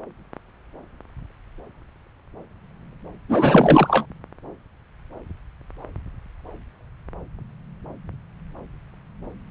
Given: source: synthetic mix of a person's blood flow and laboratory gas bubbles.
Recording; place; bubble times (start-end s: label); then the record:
Doppler ultrasound of blood flow; subclavian vein
3.28-4.05 s: bubbles
From the record:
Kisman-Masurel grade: 213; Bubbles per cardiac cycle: several, 3 to 8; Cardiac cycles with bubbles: 1 to 10%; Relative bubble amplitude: loud (0.450 to 0.775); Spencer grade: 1 (occasional bubble signal discernible with the cardiac motion signal, with majority of cardiac periods free of bubbles); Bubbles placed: anywhere in the cardiac cycle